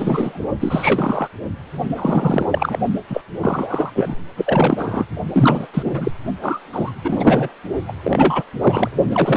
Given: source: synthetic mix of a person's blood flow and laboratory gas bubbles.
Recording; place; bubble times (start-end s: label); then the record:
Doppler ultrasound of blood flow; precordium
0.00-0.48 s: bubbles
0.60-1.28 s: bubbles
1.96-2.46 s: bubbles
2.50-2.76 s: bubbles
3.09-3.21 s: bubbles
3.40-3.90 s: bubbles
3.95-4.16 s: bubbles
4.37-5.05 s: bubbles
5.33-5.67 s: bubbles
5.74-6.12 s: bubbles
6.41-6.60 s: bubbles
6.73-6.92 s: bubbles
7.04-7.52 s: bubbles
7.88-7.93 s: bubbles
8.04-8.43 s: bubbles
8.61-8.89 s: bubbles
9.10-9.37 s: bubbles
From the record:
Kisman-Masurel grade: 343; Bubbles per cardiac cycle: rolling drumbeat, 9 or more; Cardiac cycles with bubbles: 100%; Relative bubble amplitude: loud (0.450 to 0.775); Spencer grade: 3 (all of the cardiac periods contain showers or single bubble signals, but not dominating or overriding the cardiac motion signals); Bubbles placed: only in the low amplitude regions of the cardiac cycle